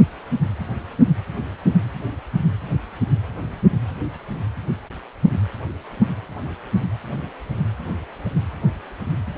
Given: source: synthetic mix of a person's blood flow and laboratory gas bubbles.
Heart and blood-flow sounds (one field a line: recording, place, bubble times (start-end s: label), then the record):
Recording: Doppler ultrasound of blood flow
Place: precordium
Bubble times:
no bubbles
From the record:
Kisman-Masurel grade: 000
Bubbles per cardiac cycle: 0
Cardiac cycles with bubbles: 0%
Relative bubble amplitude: no bubbles discernible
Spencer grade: 0 (complete lack of bubble signals)